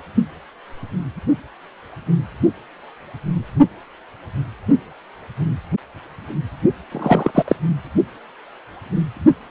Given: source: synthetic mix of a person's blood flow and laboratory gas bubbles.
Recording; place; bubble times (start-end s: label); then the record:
Doppler ultrasound of blood flow; precordium
6.92-7.31 s: bubbles
7.34-7.43 s: bubbles
7.47-7.55 s: bubbles
From the record:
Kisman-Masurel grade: 213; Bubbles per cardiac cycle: several, 3 to 8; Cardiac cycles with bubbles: 1 to 10%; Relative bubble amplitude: loud (0.450 to 0.775); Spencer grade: 1 (occasional bubble signal discernible with the cardiac motion signal, with majority of cardiac periods free of bubbles); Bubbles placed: only in the low amplitude regions of the cardiac cycle